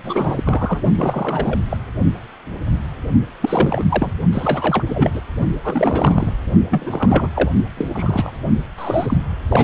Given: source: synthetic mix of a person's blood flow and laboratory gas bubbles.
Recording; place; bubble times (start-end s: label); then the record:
Doppler ultrasound of blood flow; precordium
0.03-0.81 s: bubbles
0.95-1.61 s: bubbles
1.70-1.77 s: bubbles
3.40-3.84 s: bubbles
3.89-4.12 s: bubbles
4.33-4.83 s: bubbles
4.89-5.21 s: bubbles
5.64-6.33 s: bubbles
6.70-7.29 s: bubbles
7.34-7.50 s: bubbles
7.77-7.88 s: bubbles
7.92-8.32 s: bubbles
8.78-9.17 s: bubbles
9.48-9.64 s: bubbles
From the record:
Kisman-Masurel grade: 332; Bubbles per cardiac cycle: rolling drumbeat, 9 or more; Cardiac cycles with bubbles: 50 to 99%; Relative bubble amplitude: moderate (0.250 to 0.450); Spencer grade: 3 (all of the cardiac periods contain showers or single bubble signals, but not dominating or overriding the cardiac motion signals); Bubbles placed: only in the low amplitude regions of the cardiac cycle